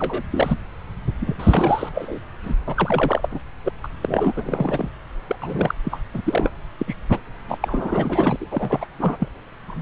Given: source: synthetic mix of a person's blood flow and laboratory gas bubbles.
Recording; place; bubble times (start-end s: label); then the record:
Doppler ultrasound of blood flow; subclavian vein
0.00-0.22 s: bubbles
0.32-0.58 s: bubbles
1.20-1.36 s: bubbles
1.39-1.89 s: bubbles
1.94-2.19 s: bubbles
2.42-2.55 s: bubbles
2.67-3.28 s: bubbles
3.31-3.39 s: bubbles
3.65-3.73 s: bubbles
3.83-3.87 s: bubbles
4.02-4.33 s: bubbles
4.36-4.89 s: bubbles
5.28-5.36 s: bubbles
5.41-5.75 s: bubbles
5.83-6.00 s: bubbles
6.14-6.21 s: bubbles
6.25-6.50 s: bubbles
6.79-6.96 s: bubbles
7.09-7.20 s: bubbles
7.48-8.36 s: bubbles
8.40-8.46 s: bubbles
8.51-8.85 s: bubbles
8.98-9.16 s: bubbles
9.20-9.28 s: bubbles
9.67-9.82 s: bubbles
From the record:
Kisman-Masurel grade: 342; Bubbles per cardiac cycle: rolling drumbeat, 9 or more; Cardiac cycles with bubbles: 100%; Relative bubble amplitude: moderate (0.250 to 0.450); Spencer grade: 3 (all of the cardiac periods contain showers or single bubble signals, but not dominating or overriding the cardiac motion signals); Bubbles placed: anywhere in the cardiac cycle